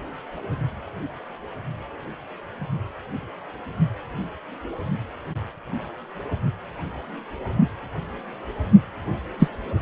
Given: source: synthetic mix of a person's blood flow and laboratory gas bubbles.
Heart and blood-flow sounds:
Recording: Doppler ultrasound of blood flow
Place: precordium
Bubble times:
9.39-9.48 s: bubbles
From the record:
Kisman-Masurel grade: 123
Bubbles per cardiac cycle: 1 to 2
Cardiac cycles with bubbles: 10 to 50%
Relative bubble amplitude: loud (0.450 to 0.775)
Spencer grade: 2 (many but less than half of the cardiac periods contain bubble signals, singularly or in groups)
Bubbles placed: only in the low amplitude regions of the cardiac cycle

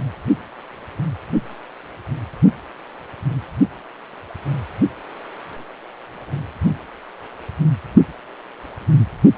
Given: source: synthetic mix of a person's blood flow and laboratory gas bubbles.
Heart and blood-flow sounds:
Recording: Doppler ultrasound of blood flow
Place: precordium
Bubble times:
6.21-6.44 s: bubbles
From the record:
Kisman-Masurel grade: 121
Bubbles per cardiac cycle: 1 to 2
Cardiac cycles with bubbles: 10 to 50%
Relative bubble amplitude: barely perceptible (0.100 to 0.250)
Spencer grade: 2 (many but less than half of the cardiac periods contain bubble signals, singularly or in groups)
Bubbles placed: anywhere in the cardiac cycle

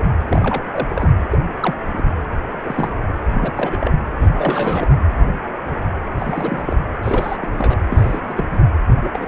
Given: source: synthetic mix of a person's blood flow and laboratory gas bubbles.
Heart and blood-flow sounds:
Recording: Doppler ultrasound of blood flow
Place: precordium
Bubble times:
0.00-0.02 s: bubbles
0.28-0.61 s: bubbles
0.71-1.12 s: bubbles
1.31-1.39 s: bubbles
1.60-1.74 s: bubbles
1.93-2.04 s: bubbles
2.64-2.90 s: bubbles
3.34-3.52 s: bubbles
3.55-3.91 s: bubbles
4.22-4.30 s: bubbles
4.33-4.88 s: bubbles
6.17-6.80 s: bubbles
7.02-7.38 s: bubbles
7.41-7.85 s: bubbles
7.92-8.21 s: bubbles
8.24-8.45 s: bubbles
8.51-8.64 s: bubbles
9.04-9.11 s: bubbles
9.13-9.28 s: bubbles
From the record:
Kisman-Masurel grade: 232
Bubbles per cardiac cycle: several, 3 to 8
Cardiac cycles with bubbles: 50 to 99%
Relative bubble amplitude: moderate (0.250 to 0.450)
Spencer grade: 3 (all of the cardiac periods contain showers or single bubble signals, but not dominating or overriding the cardiac motion signals)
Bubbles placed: anywhere in the cardiac cycle

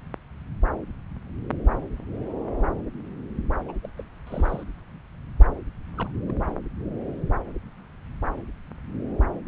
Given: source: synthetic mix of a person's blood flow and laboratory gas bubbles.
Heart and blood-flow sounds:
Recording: Doppler ultrasound of blood flow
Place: subclavian vein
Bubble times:
3.68-3.77 s: bubbles
3.83-3.89 s: bubbles
3.97-4.03 s: bubbles
4.26-4.63 s: bubbles
5.94-6.10 s: bubbles
6.27-6.32 s: bubbles
From the record:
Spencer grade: 2 (many but less than half of the cardiac periods contain bubble signals, singularly or in groups)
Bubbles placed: anywhere in the cardiac cycle

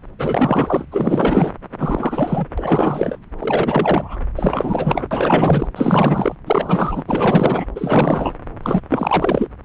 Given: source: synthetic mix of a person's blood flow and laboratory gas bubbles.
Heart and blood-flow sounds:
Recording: Doppler ultrasound of blood flow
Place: subclavian vein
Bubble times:
0.18-0.88 s: bubbles
0.91-1.51 s: bubbles
1.79-2.46 s: bubbles
2.58-3.17 s: bubbles
3.38-4.18 s: bubbles
4.35-5.06 s: bubbles
5.11-5.68 s: bubbles
5.75-6.35 s: bubbles
6.46-7.04 s: bubbles
7.07-7.66 s: bubbles
7.75-8.37 s: bubbles
8.62-8.80 s: bubbles
8.90-9.48 s: bubbles
9.62-9.65 s: bubbles
From the record:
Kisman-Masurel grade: 444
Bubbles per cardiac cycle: continuous sound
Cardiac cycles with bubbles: 100%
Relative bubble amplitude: maximal (0.775 to 0.999)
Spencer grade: 4 (maximum detectable bubble signal sounding continuously throughout systole and diastole of every cardiac period, and overriding the amplitude of the normal cardiac signals)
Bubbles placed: anywhere in the cardiac cycle

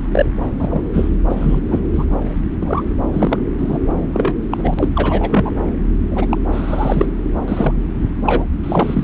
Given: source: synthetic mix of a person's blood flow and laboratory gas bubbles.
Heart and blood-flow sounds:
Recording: Doppler ultrasound of blood flow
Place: subclavian vein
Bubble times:
0.11-0.26 s: bubbles
0.57-0.81 s: bubbles
0.93-1.11 s: bubbles
1.28-1.60 s: bubbles
1.68-1.80 s: bubbles
1.92-2.05 s: bubbles
2.62-2.83 s: bubbles
3.12-3.38 s: bubbles
3.57-3.79 s: bubbles
4.13-4.33 s: bubbles
4.50-4.74 s: bubbles
4.77-4.89 s: bubbles
4.95-5.52 s: bubbles
6.11-6.26 s: bubbles
6.31-6.39 s: bubbles
6.52-7.06 s: bubbles
7.45-7.75 s: bubbles
8.22-8.44 s: bubbles
8.63-9.04 s: bubbles
From the record:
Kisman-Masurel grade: 243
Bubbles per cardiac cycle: several, 3 to 8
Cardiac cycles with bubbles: 100%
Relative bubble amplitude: loud (0.450 to 0.775)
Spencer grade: 3 (all of the cardiac periods contain showers or single bubble signals, but not dominating or overriding the cardiac motion signals)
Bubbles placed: anywhere in the cardiac cycle

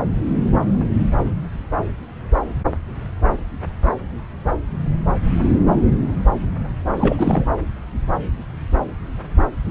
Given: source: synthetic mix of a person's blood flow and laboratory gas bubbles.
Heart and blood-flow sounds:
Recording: Doppler ultrasound of blood flow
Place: subclavian vein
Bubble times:
6.97-7.46 s: bubbles
From the record:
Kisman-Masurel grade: 212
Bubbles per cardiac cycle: several, 3 to 8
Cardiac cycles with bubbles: 1 to 10%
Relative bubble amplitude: moderate (0.250 to 0.450)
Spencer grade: 1 (occasional bubble signal discernible with the cardiac motion signal, with majority of cardiac periods free of bubbles)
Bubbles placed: anywhere in the cardiac cycle

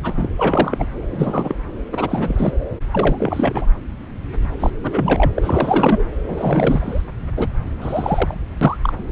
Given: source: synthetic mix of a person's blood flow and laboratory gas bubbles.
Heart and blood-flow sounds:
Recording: Doppler ultrasound of blood flow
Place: subclavian vein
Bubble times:
0.03-0.29 s: bubbles
0.37-0.88 s: bubbles
1.09-1.55 s: bubbles
1.91-2.54 s: bubbles
2.91-3.66 s: bubbles
4.59-4.70 s: bubbles
4.81-5.31 s: bubbles
5.37-6.04 s: bubbles
6.28-7.01 s: bubbles
7.37-7.48 s: bubbles
7.81-8.35 s: bubbles
8.61-8.78 s: bubbles
8.82-8.93 s: bubbles
From the record:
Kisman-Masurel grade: 332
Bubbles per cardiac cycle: rolling drumbeat, 9 or more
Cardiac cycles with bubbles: 50 to 99%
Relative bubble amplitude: moderate (0.250 to 0.450)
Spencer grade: 3 (all of the cardiac periods contain showers or single bubble signals, but not dominating or overriding the cardiac motion signals)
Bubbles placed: anywhere in the cardiac cycle

